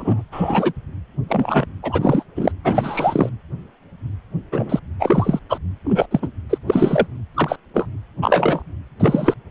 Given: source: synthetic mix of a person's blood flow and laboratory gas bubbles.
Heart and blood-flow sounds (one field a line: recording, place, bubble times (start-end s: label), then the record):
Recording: Doppler ultrasound of blood flow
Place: precordium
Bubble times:
0.00-0.23 s: bubbles
0.32-0.72 s: bubbles
1.28-1.66 s: bubbles
1.82-2.24 s: bubbles
2.35-2.52 s: bubbles
2.64-3.30 s: bubbles
4.52-4.79 s: bubbles
4.99-5.39 s: bubbles
5.49-5.58 s: bubbles
5.84-6.06 s: bubbles
6.10-6.29 s: bubbles
6.50-6.58 s: bubbles
6.67-7.06 s: bubbles
7.34-7.56 s: bubbles
7.74-7.86 s: bubbles
8.22-8.62 s: bubbles
9.00-9.34 s: bubbles
From the record:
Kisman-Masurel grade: 233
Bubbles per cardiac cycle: several, 3 to 8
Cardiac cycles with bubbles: 50 to 99%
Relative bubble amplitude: loud (0.450 to 0.775)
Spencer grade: 3 (all of the cardiac periods contain showers or single bubble signals, but not dominating or overriding the cardiac motion signals)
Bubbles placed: anywhere in the cardiac cycle